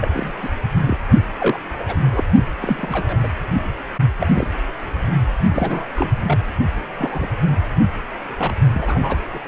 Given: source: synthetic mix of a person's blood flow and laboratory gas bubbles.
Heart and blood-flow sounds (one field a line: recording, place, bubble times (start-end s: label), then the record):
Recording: Doppler ultrasound of blood flow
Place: precordium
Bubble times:
0.00-0.09 s: bubbles
0.12-0.32 s: bubbles
0.42-0.49 s: bubbles
0.86-0.97 s: bubbles
1.40-1.58 s: bubbles
1.79-1.96 s: bubbles
2.11-2.23 s: bubbles
2.60-3.17 s: bubbles
3.23-3.28 s: bubbles
4.20-4.27 s: bubbles
4.35-4.48 s: bubbles
5.54-5.86 s: bubbles
5.96-6.10 s: bubbles
6.27-6.38 s: bubbles
6.98-7.28 s: bubbles
8.38-8.53 s: bubbles
8.74-9.17 s: bubbles
9.34-9.39 s: bubbles
From the record:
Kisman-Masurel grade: 242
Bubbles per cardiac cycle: several, 3 to 8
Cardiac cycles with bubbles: 100%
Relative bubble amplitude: moderate (0.250 to 0.450)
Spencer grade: 3 (all of the cardiac periods contain showers or single bubble signals, but not dominating or overriding the cardiac motion signals)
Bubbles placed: only in the low amplitude regions of the cardiac cycle